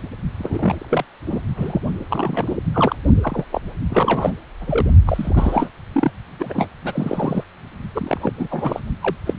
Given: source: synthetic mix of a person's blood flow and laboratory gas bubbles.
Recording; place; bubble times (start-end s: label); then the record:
Doppler ultrasound of blood flow; precordium
0.39-1.04 s: bubbles
1.26-1.42 s: bubbles
1.56-1.79 s: bubbles
2.10-2.56 s: bubbles
2.74-2.96 s: bubbles
3.22-3.45 s: bubbles
3.52-3.62 s: bubbles
3.90-4.32 s: bubbles
4.60-4.90 s: bubbles
5.06-5.69 s: bubbles
5.92-6.11 s: bubbles
6.39-6.68 s: bubbles
6.84-7.44 s: bubbles
7.93-8.33 s: bubbles
8.37-8.48 s: bubbles
8.51-8.80 s: bubbles
9.03-9.16 s: bubbles
9.26-9.34 s: bubbles
From the record:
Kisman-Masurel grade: 342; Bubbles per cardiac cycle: rolling drumbeat, 9 or more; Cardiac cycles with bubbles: 100%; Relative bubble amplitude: moderate (0.250 to 0.450); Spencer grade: 3 (all of the cardiac periods contain showers or single bubble signals, but not dominating or overriding the cardiac motion signals); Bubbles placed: only in the low amplitude regions of the cardiac cycle